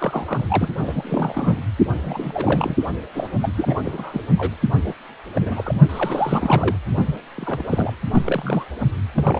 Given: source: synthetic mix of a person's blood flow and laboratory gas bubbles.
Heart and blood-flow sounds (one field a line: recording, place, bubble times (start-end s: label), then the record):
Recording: Doppler ultrasound of blood flow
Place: precordium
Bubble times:
0.00-0.44 s: bubbles
0.48-0.68 s: bubbles
0.78-1.62 s: bubbles
2.01-2.75 s: bubbles
3.15-3.27 s: bubbles
3.40-3.52 s: bubbles
3.56-3.75 s: bubbles
3.85-4.21 s: bubbles
4.38-4.55 s: bubbles
4.75-4.94 s: bubbles
5.35-5.75 s: bubbles
5.89-6.77 s: bubbles
7.04-7.19 s: bubbles
7.35-7.64 s: bubbles
7.70-7.92 s: bubbles
8.11-8.64 s: bubbles
9.15-9.39 s: bubbles
From the record:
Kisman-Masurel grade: 342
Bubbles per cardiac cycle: rolling drumbeat, 9 or more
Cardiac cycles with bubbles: 100%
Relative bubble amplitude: moderate (0.250 to 0.450)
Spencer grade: 3 (all of the cardiac periods contain showers or single bubble signals, but not dominating or overriding the cardiac motion signals)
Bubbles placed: only in the low amplitude regions of the cardiac cycle